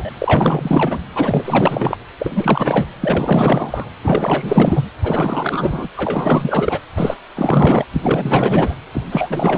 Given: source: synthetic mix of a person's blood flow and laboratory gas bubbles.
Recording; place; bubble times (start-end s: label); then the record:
Doppler ultrasound of blood flow; precordium
0.00-0.11 s: bubbles
0.21-0.99 s: bubbles
1.15-1.97 s: bubbles
2.19-2.88 s: bubbles
3.02-3.89 s: bubbles
4.03-4.89 s: bubbles
5.03-5.88 s: bubbles
5.96-6.79 s: bubbles
6.95-7.16 s: bubbles
7.36-7.85 s: bubbles
7.92-8.73 s: bubbles
8.94-9.01 s: bubbles
9.11-9.58 s: bubbles
From the record:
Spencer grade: 4 (maximum detectable bubble signal sounding continuously throughout systole and diastole of every cardiac period, and overriding the amplitude of the normal cardiac signals); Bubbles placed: anywhere in the cardiac cycle